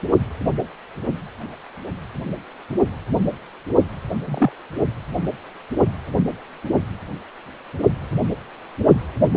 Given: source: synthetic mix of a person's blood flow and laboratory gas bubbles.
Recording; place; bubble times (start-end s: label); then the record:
Doppler ultrasound of blood flow; precordium
4.26-4.52 s: bubbles
From the record:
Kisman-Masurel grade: 112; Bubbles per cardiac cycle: 1 to 2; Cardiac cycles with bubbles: 1 to 10%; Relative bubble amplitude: moderate (0.250 to 0.450); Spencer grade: 1 (occasional bubble signal discernible with the cardiac motion signal, with majority of cardiac periods free of bubbles); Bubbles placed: only in the low amplitude regions of the cardiac cycle